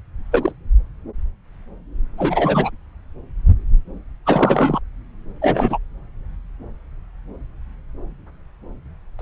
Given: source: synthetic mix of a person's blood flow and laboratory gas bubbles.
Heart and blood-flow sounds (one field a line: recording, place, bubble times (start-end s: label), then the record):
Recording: Doppler ultrasound of blood flow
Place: subclavian vein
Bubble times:
0.32-0.52 s: bubbles
2.17-2.70 s: bubbles
4.25-4.79 s: bubbles
5.42-5.78 s: bubbles
9.19-9.22 s: bubbles
From the record:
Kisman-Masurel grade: 223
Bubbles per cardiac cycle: several, 3 to 8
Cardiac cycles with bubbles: 10 to 50%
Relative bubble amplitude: loud (0.450 to 0.775)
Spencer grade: 2 (many but less than half of the cardiac periods contain bubble signals, singularly or in groups)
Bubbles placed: anywhere in the cardiac cycle